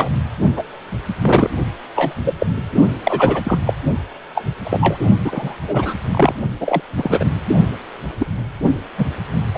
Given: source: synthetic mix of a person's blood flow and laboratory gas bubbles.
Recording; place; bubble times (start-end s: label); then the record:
Doppler ultrasound of blood flow; precordium
0.00-0.09 s: bubbles
0.56-0.63 s: bubbles
1.21-1.50 s: bubbles
1.95-2.13 s: bubbles
2.23-2.33 s: bubbles
2.39-2.46 s: bubbles
3.04-3.58 s: bubbles
3.66-3.74 s: bubbles
4.35-4.44 s: bubbles
4.63-5.04 s: bubbles
5.25-5.54 s: bubbles
5.67-5.93 s: bubbles
6.11-6.34 s: bubbles
6.60-6.82 s: bubbles
6.97-7.25 s: bubbles
8.20-8.26 s: bubbles
8.63-8.71 s: bubbles
8.98-9.06 s: bubbles
9.54-9.58 s: bubbles
From the record:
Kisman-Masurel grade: 243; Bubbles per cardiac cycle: several, 3 to 8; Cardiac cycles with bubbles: 100%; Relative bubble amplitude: loud (0.450 to 0.775); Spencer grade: 3 (all of the cardiac periods contain showers or single bubble signals, but not dominating or overriding the cardiac motion signals); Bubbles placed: only in the low amplitude regions of the cardiac cycle